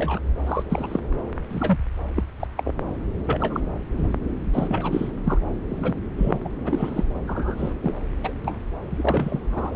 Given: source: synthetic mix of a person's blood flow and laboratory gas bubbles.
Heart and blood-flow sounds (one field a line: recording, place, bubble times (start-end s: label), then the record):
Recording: Doppler ultrasound of blood flow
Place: subclavian vein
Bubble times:
0.00-0.20 s: bubbles
0.46-0.64 s: bubbles
0.69-1.00 s: bubbles
1.48-1.78 s: bubbles
2.15-2.23 s: bubbles
2.40-2.48 s: bubbles
2.56-2.75 s: bubbles
3.26-3.60 s: bubbles
3.97-4.15 s: bubbles
4.52-5.10 s: bubbles
5.24-5.38 s: bubbles
5.69-5.94 s: bubbles
6.17-6.38 s: bubbles
6.44-6.48 s: bubbles
6.64-7.04 s: bubbles
7.27-7.73 s: bubbles
7.80-7.95 s: bubbles
8.23-8.37 s: bubbles
8.45-8.59 s: bubbles
8.90-9.38 s: bubbles
9.51-9.75 s: bubbles
From the record:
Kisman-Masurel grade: 243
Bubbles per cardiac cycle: several, 3 to 8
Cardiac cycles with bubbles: 100%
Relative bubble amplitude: loud (0.450 to 0.775)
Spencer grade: 3 (all of the cardiac periods contain showers or single bubble signals, but not dominating or overriding the cardiac motion signals)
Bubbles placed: anywhere in the cardiac cycle